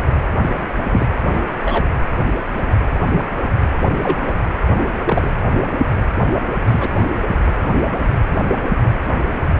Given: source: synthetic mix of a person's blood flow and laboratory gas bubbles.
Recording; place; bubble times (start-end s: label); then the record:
Doppler ultrasound of blood flow; precordium
0.91-1.06 s: bubbles
1.33-1.40 s: bubbles
1.62-1.88 s: bubbles
4.03-4.16 s: bubbles
4.27-4.32 s: bubbles
5.05-5.30 s: bubbles
6.65-6.89 s: bubbles
From the record:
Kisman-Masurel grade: 123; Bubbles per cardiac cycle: 1 to 2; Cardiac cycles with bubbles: 10 to 50%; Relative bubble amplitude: loud (0.450 to 0.775); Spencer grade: 2 (many but less than half of the cardiac periods contain bubble signals, singularly or in groups); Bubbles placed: anywhere in the cardiac cycle